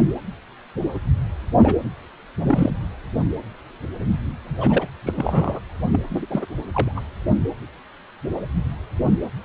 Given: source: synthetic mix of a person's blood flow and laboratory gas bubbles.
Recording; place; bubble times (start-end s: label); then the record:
Doppler ultrasound of blood flow; precordium
1.62-1.74 s: bubbles
2.41-2.70 s: bubbles
4.46-4.88 s: bubbles
5.06-5.60 s: bubbles
5.92-6.00 s: bubbles
6.09-6.26 s: bubbles
6.30-6.46 s: bubbles
6.72-6.92 s: bubbles
6.96-7.00 s: bubbles
From the record:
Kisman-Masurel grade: 222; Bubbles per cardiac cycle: several, 3 to 8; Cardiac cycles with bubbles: 10 to 50%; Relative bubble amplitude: moderate (0.250 to 0.450); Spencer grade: 2 (many but less than half of the cardiac periods contain bubble signals, singularly or in groups); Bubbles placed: anywhere in the cardiac cycle